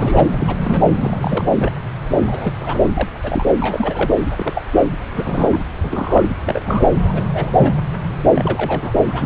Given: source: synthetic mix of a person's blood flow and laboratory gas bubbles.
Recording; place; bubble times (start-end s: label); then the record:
Doppler ultrasound of blood flow; subclavian vein
0.00-0.24 s: bubbles
0.30-0.56 s: bubbles
0.64-0.81 s: bubbles
0.96-1.55 s: bubbles
1.58-1.75 s: bubbles
2.26-2.52 s: bubbles
2.60-2.78 s: bubbles
2.95-3.08 s: bubbles
3.23-3.45 s: bubbles
3.56-4.15 s: bubbles
4.35-4.63 s: bubbles
4.85-4.92 s: bubbles
5.11-5.59 s: bubbles
5.83-6.23 s: bubbles
6.46-6.60 s: bubbles
6.65-6.86 s: bubbles
7.08-7.23 s: bubbles
7.33-7.51 s: bubbles
7.56-7.73 s: bubbles
8.34-8.94 s: bubbles
9.08-9.26 s: bubbles
From the record:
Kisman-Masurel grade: 232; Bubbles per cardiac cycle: several, 3 to 8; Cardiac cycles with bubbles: 50 to 99%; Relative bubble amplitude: moderate (0.250 to 0.450); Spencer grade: 3 (all of the cardiac periods contain showers or single bubble signals, but not dominating or overriding the cardiac motion signals); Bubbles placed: anywhere in the cardiac cycle